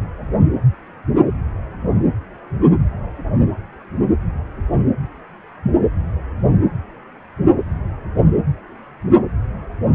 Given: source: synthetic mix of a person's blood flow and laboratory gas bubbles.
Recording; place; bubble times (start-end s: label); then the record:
Doppler ultrasound of blood flow; precordium
no bubbles
From the record:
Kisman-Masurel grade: 000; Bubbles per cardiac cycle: 0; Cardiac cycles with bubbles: 0%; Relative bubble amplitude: no bubbles discernible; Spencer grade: 0 (complete lack of bubble signals)